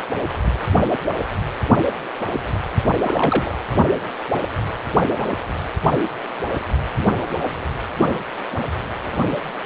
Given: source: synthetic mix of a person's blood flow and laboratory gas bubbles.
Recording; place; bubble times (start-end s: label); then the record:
Doppler ultrasound of blood flow; precordium
3.02-3.55 s: bubbles
From the record:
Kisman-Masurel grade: 112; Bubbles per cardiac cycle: 1 to 2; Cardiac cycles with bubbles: 1 to 10%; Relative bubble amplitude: moderate (0.250 to 0.450); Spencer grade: 1 (occasional bubble signal discernible with the cardiac motion signal, with majority of cardiac periods free of bubbles); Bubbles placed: anywhere in the cardiac cycle